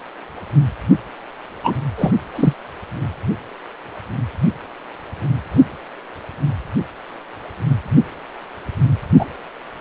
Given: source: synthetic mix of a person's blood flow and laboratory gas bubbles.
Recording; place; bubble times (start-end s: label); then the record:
Doppler ultrasound of blood flow; precordium
1.63-1.75 s: bubbles
1.98-2.12 s: bubbles
2.35-2.54 s: bubbles
9.19-9.26 s: bubbles
From the record:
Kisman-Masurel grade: 123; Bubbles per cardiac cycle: 1 to 2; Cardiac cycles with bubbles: 10 to 50%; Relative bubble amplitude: loud (0.450 to 0.775); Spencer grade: 2 (many but less than half of the cardiac periods contain bubble signals, singularly or in groups); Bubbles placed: anywhere in the cardiac cycle